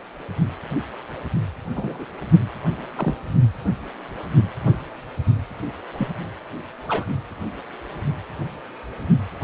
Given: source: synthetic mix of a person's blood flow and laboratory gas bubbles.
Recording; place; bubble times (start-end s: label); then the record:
Doppler ultrasound of blood flow; precordium
1.76-2.06 s: bubbles
2.96-3.15 s: bubbles
5.98-6.08 s: bubbles
6.88-7.05 s: bubbles
From the record:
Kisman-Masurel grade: 122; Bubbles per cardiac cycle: 1 to 2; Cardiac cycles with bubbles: 10 to 50%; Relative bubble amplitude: moderate (0.250 to 0.450); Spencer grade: 2 (many but less than half of the cardiac periods contain bubble signals, singularly or in groups); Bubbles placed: only in the low amplitude regions of the cardiac cycle